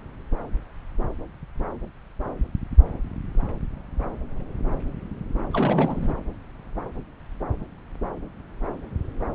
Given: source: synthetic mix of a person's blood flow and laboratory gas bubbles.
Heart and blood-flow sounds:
Doppler ultrasound of blood flow; subclavian vein
5.53-6.14 s: bubbles
From the record:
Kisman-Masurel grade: 211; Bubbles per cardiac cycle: several, 3 to 8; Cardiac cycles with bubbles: 1 to 10%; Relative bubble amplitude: barely perceptible (0.100 to 0.250); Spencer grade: 1 (occasional bubble signal discernible with the cardiac motion signal, with majority of cardiac periods free of bubbles); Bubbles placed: anywhere in the cardiac cycle

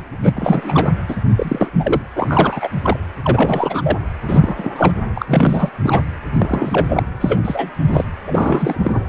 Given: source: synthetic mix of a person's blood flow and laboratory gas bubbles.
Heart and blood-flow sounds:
Doppler ultrasound of blood flow; precordium
0.23-0.92 s: bubbles
1.07-1.16 s: bubbles
1.36-1.70 s: bubbles
1.74-2.01 s: bubbles
2.15-2.68 s: bubbles
2.83-2.96 s: bubbles
3.24-3.98 s: bubbles
4.28-4.94 s: bubbles
5.15-5.69 s: bubbles
5.83-6.02 s: bubbles
6.33-6.86 s: bubbles
6.89-7.03 s: bubbles
7.21-7.71 s: bubbles
7.88-8.04 s: bubbles
8.26-9.04 s: bubbles
From the record:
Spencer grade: 3 (all of the cardiac periods contain showers or single bubble signals, but not dominating or overriding the cardiac motion signals); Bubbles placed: anywhere in the cardiac cycle

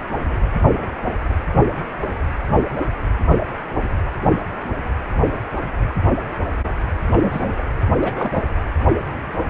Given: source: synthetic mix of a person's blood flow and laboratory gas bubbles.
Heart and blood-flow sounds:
Doppler ultrasound of blood flow; precordium
7.12-7.64 s: bubbles
7.99-8.43 s: bubbles
From the record:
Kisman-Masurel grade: 222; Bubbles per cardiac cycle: several, 3 to 8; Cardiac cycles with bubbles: 10 to 50%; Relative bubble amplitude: moderate (0.250 to 0.450); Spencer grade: 2 (many but less than half of the cardiac periods contain bubble signals, singularly or in groups); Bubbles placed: anywhere in the cardiac cycle

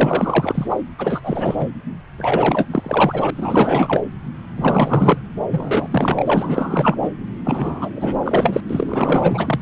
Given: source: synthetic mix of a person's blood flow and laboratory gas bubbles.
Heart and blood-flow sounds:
Doppler ultrasound of blood flow; subclavian vein
0.00-0.76 s: bubbles
0.98-1.67 s: bubbles
2.17-2.66 s: bubbles
2.70-3.30 s: bubbles
3.35-4.03 s: bubbles
4.56-5.21 s: bubbles
5.50-5.88 s: bubbles
5.92-6.97 s: bubbles
7.01-7.09 s: bubbles
7.45-7.90 s: bubbles
7.96-8.16 s: bubbles
8.22-8.61 s: bubbles
8.69-9.60 s: bubbles
From the record:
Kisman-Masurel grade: 444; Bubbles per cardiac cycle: continuous sound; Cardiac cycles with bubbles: 100%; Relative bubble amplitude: maximal (0.775 to 0.999); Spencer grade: 4 (maximum detectable bubble signal sounding continuously throughout systole and diastole of every cardiac period, and overriding the amplitude of the normal cardiac signals); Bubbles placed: anywhere in the cardiac cycle

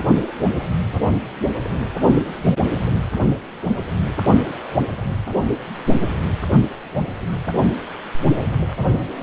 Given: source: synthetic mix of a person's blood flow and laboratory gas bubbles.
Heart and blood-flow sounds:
Doppler ultrasound of blood flow; precordium
no bubbles
From the record:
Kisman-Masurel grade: 000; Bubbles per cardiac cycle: 0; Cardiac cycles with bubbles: 0%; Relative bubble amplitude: no bubbles discernible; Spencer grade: 0 (complete lack of bubble signals)

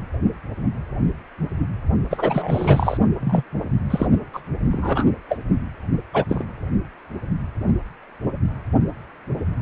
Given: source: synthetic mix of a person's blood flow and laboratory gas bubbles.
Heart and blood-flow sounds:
Doppler ultrasound of blood flow; precordium
2.10-2.98 s: bubbles
3.20-3.43 s: bubbles
3.90-4.07 s: bubbles
4.33-4.41 s: bubbles
4.72-5.06 s: bubbles
5.28-5.38 s: bubbles
6.13-6.24 s: bubbles
6.29-6.45 s: bubbles
From the record:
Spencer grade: 2 (many but less than half of the cardiac periods contain bubble signals, singularly or in groups); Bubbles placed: only in the low amplitude regions of the cardiac cycle

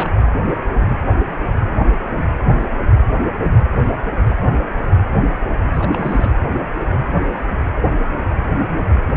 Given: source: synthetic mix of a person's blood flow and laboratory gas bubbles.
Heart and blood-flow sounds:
Doppler ultrasound of blood flow; precordium
0.00-0.10 s: bubbles
5.74-6.32 s: bubbles
From the record:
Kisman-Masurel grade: 221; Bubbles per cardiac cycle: several, 3 to 8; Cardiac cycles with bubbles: 10 to 50%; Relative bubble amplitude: barely perceptible (0.100 to 0.250); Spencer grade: 2 (many but less than half of the cardiac periods contain bubble signals, singularly or in groups); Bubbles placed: anywhere in the cardiac cycle

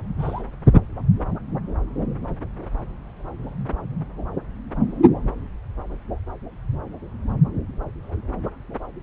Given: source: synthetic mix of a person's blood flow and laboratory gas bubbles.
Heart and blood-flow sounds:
Doppler ultrasound of blood flow; subclavian vein
0.19-0.43 s: bubbles
From the record:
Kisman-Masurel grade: 111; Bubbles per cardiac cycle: 1 to 2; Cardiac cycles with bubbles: 1 to 10%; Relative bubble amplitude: barely perceptible (0.100 to 0.250); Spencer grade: 1 (occasional bubble signal discernible with the cardiac motion signal, with majority of cardiac periods free of bubbles); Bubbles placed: anywhere in the cardiac cycle

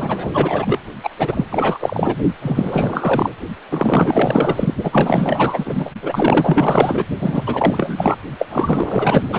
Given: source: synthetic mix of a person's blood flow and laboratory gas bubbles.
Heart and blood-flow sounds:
Doppler ultrasound of blood flow; precordium
0.00-0.79 s: bubbles
1.03-1.09 s: bubbles
1.19-1.46 s: bubbles
1.51-2.16 s: bubbles
2.42-3.31 s: bubbles
3.69-4.74 s: bubbles
4.83-5.91 s: bubbles
6.02-7.04 s: bubbles
7.20-8.19 s: bubbles
8.38-8.47 s: bubbles
8.50-9.27 s: bubbles
9.32-9.39 s: bubbles
From the record:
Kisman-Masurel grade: 444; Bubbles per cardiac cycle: continuous sound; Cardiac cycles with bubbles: 100%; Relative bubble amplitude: maximal (0.775 to 0.999); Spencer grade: 4 (maximum detectable bubble signal sounding continuously throughout systole and diastole of every cardiac period, and overriding the amplitude of the normal cardiac signals); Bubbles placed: only in the low amplitude regions of the cardiac cycle

